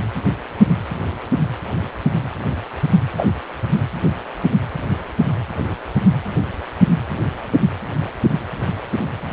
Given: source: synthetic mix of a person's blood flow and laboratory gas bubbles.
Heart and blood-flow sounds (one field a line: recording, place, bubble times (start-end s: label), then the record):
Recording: Doppler ultrasound of blood flow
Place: precordium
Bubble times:
3.17-3.28 s: bubbles
From the record:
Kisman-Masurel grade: 113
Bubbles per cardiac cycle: 1 to 2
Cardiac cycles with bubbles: 1 to 10%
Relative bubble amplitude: loud (0.450 to 0.775)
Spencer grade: 1 (occasional bubble signal discernible with the cardiac motion signal, with majority of cardiac periods free of bubbles)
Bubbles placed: anywhere in the cardiac cycle